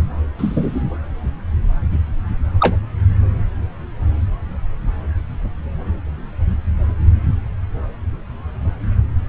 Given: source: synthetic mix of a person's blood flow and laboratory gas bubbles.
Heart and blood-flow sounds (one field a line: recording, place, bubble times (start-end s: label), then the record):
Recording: Doppler ultrasound of blood flow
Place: subclavian vein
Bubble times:
0.38-0.80 s: bubbles
2.60-2.76 s: bubbles
From the record:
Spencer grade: 1 (occasional bubble signal discernible with the cardiac motion signal, with majority of cardiac periods free of bubbles)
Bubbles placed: anywhere in the cardiac cycle